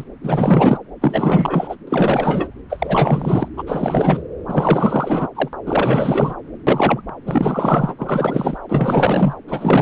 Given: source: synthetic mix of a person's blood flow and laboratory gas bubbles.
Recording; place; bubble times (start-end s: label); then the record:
Doppler ultrasound of blood flow; subclavian vein
0.00-0.04 s: bubbles
0.23-0.78 s: bubbles
1.01-1.76 s: bubbles
1.87-2.48 s: bubbles
2.69-3.48 s: bubbles
3.57-3.64 s: bubbles
3.67-4.23 s: bubbles
4.47-5.28 s: bubbles
5.35-5.49 s: bubbles
5.66-6.33 s: bubbles
6.67-7.01 s: bubbles
7.26-7.95 s: bubbles
7.98-8.58 s: bubbles
8.69-9.34 s: bubbles
9.47-9.82 s: bubbles
From the record:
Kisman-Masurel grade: 444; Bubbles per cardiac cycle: continuous sound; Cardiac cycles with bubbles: 100%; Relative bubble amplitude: maximal (0.775 to 0.999); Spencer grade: 4 (maximum detectable bubble signal sounding continuously throughout systole and diastole of every cardiac period, and overriding the amplitude of the normal cardiac signals); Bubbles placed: anywhere in the cardiac cycle